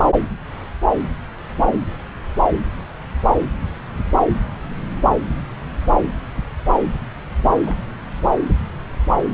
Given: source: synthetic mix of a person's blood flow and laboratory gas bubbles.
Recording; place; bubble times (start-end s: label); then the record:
Doppler ultrasound of blood flow; subclavian vein
7.65-7.78 s: bubbles
From the record:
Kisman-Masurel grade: 111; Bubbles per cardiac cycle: 1 to 2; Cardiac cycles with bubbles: 1 to 10%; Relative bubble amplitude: barely perceptible (0.100 to 0.250); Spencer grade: 1 (occasional bubble signal discernible with the cardiac motion signal, with majority of cardiac periods free of bubbles); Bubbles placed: anywhere in the cardiac cycle